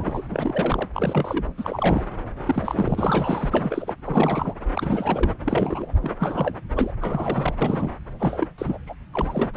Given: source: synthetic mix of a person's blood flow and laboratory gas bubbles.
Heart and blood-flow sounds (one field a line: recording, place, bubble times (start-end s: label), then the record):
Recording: Doppler ultrasound of blood flow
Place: subclavian vein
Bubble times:
0.00-0.22 s: bubbles
0.29-0.89 s: bubbles
0.94-1.44 s: bubbles
1.57-2.04 s: bubbles
2.46-3.93 s: bubbles
4.05-4.56 s: bubbles
4.72-5.34 s: bubbles
5.45-5.92 s: bubbles
6.02-6.56 s: bubbles
6.75-6.92 s: bubbles
7.01-7.53 s: bubbles
7.61-7.92 s: bubbles
8.19-8.47 s: bubbles
8.58-8.78 s: bubbles
8.87-8.94 s: bubbles
9.13-9.50 s: bubbles
9.54-9.57 s: bubbles
From the record:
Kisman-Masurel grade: 332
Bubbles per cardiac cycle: rolling drumbeat, 9 or more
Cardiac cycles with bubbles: 50 to 99%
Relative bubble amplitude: moderate (0.250 to 0.450)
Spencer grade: 3 (all of the cardiac periods contain showers or single bubble signals, but not dominating or overriding the cardiac motion signals)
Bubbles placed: anywhere in the cardiac cycle